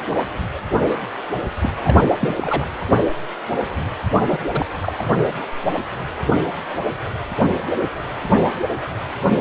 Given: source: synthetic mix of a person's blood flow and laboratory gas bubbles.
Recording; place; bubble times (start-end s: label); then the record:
Doppler ultrasound of blood flow; precordium
1.62-1.70 s: bubbles
1.84-1.99 s: bubbles
2.19-2.35 s: bubbles
2.37-2.68 s: bubbles
4.12-4.39 s: bubbles
4.52-4.66 s: bubbles
4.81-4.92 s: bubbles
4.98-5.26 s: bubbles
From the record:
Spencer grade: 2 (many but less than half of the cardiac periods contain bubble signals, singularly or in groups); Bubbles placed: anywhere in the cardiac cycle